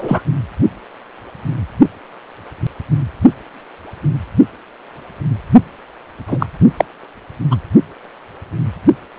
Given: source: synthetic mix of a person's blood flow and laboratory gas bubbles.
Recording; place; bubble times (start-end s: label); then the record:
Doppler ultrasound of blood flow; precordium
0.00-0.23 s: bubbles
6.27-6.46 s: bubbles
6.77-6.85 s: bubbles
7.50-7.56 s: bubbles
From the record:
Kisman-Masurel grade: 223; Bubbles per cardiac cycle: several, 3 to 8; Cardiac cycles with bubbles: 10 to 50%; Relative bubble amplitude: loud (0.450 to 0.775); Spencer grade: 2 (many but less than half of the cardiac periods contain bubble signals, singularly or in groups); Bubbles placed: only in the low amplitude regions of the cardiac cycle